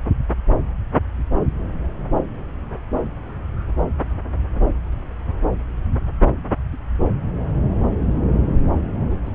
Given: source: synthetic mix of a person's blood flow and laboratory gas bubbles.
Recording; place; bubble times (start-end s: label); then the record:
Doppler ultrasound of blood flow; subclavian vein
9.10-9.16 s: bubbles
9.26-9.31 s: bubbles
From the record:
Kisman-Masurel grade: 111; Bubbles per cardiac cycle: 1 to 2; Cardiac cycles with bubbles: 1 to 10%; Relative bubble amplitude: barely perceptible (0.100 to 0.250); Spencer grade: 1 (occasional bubble signal discernible with the cardiac motion signal, with majority of cardiac periods free of bubbles); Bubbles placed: anywhere in the cardiac cycle